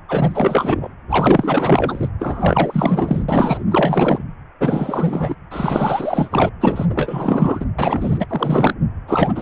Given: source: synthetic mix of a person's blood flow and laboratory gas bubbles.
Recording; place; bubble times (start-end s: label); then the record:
Doppler ultrasound of blood flow; precordium
0.08-0.95 s: bubbles
1.09-2.08 s: bubbles
2.19-3.25 s: bubbles
3.28-3.64 s: bubbles
3.71-4.25 s: bubbles
4.60-5.35 s: bubbles
5.50-6.50 s: bubbles
6.60-6.85 s: bubbles
6.89-7.66 s: bubbles
7.79-8.74 s: bubbles
9.07-9.42 s: bubbles
From the record:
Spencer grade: 4 (maximum detectable bubble signal sounding continuously throughout systole and diastole of every cardiac period, and overriding the amplitude of the normal cardiac signals); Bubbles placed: anywhere in the cardiac cycle